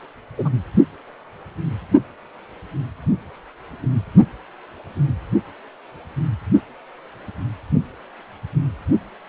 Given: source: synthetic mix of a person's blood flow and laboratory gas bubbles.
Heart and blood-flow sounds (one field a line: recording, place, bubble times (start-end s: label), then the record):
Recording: Doppler ultrasound of blood flow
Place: precordium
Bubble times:
0.38-0.49 s: bubbles
From the record:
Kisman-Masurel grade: 112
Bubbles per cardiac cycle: 1 to 2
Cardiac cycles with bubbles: 1 to 10%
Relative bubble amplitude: moderate (0.250 to 0.450)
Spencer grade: 1 (occasional bubble signal discernible with the cardiac motion signal, with majority of cardiac periods free of bubbles)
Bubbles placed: only in the low amplitude regions of the cardiac cycle